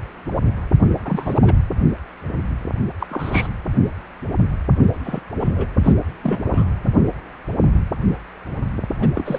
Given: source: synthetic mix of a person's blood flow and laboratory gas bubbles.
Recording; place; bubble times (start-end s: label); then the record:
Doppler ultrasound of blood flow; precordium
1.05-1.56 s: bubbles
3.00-3.06 s: bubbles
3.10-3.48 s: bubbles
5.04-5.20 s: bubbles
5.40-5.51 s: bubbles
5.56-5.67 s: bubbles
5.83-5.92 s: bubbles
6.23-6.67 s: bubbles
8.99-9.09 s: bubbles
9.14-9.38 s: bubbles
From the record:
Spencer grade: 2 (many but less than half of the cardiac periods contain bubble signals, singularly or in groups); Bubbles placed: anywhere in the cardiac cycle